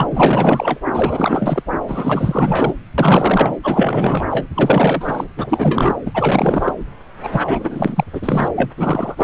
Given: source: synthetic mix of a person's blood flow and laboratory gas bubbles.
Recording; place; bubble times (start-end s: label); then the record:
Doppler ultrasound of blood flow; subclavian vein
0.00-0.81 s: bubbles
0.93-1.63 s: bubbles
1.88-2.73 s: bubbles
2.98-3.55 s: bubbles
3.63-4.25 s: bubbles
4.29-4.47 s: bubbles
4.54-5.24 s: bubbles
5.36-6.00 s: bubbles
6.05-6.73 s: bubbles
7.23-7.29 s: bubbles
7.31-8.04 s: bubbles
8.15-8.21 s: bubbles
8.23-8.49 s: bubbles
8.55-8.70 s: bubbles
8.77-9.24 s: bubbles
From the record:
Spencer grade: 4 (maximum detectable bubble signal sounding continuously throughout systole and diastole of every cardiac period, and overriding the amplitude of the normal cardiac signals); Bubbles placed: anywhere in the cardiac cycle